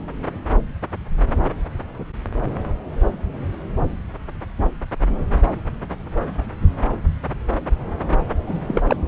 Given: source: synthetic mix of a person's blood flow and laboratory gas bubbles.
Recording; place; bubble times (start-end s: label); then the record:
Doppler ultrasound of blood flow; subclavian vein
8.46-8.81 s: bubbles
8.87-8.96 s: bubbles
From the record:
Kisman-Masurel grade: 212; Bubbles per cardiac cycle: several, 3 to 8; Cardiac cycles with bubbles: 1 to 10%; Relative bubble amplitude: moderate (0.250 to 0.450); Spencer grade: 1 (occasional bubble signal discernible with the cardiac motion signal, with majority of cardiac periods free of bubbles); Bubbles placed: anywhere in the cardiac cycle